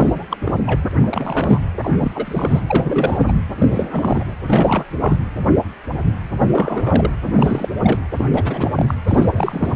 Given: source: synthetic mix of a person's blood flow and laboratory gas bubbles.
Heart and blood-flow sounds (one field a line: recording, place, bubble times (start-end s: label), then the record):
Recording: Doppler ultrasound of blood flow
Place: precordium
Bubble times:
0.00-0.24 s: bubbles
0.30-0.37 s: bubbles
0.45-0.60 s: bubbles
0.66-0.81 s: bubbles
0.91-0.94 s: bubbles
1.03-1.60 s: bubbles
1.83-1.91 s: bubbles
1.96-2.12 s: bubbles
2.15-2.61 s: bubbles
2.67-3.33 s: bubbles
3.58-4.24 s: bubbles
4.47-4.85 s: bubbles
5.00-5.17 s: bubbles
6.38-7.12 s: bubbles
7.25-7.33 s: bubbles
7.35-7.69 s: bubbles
7.81-8.00 s: bubbles
8.18-8.25 s: bubbles
8.32-8.71 s: bubbles
8.75-8.95 s: bubbles
9.07-9.76 s: bubbles
From the record:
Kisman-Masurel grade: 332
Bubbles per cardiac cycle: rolling drumbeat, 9 or more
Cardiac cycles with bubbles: 50 to 99%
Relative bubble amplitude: moderate (0.250 to 0.450)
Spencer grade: 3 (all of the cardiac periods contain showers or single bubble signals, but not dominating or overriding the cardiac motion signals)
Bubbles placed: anywhere in the cardiac cycle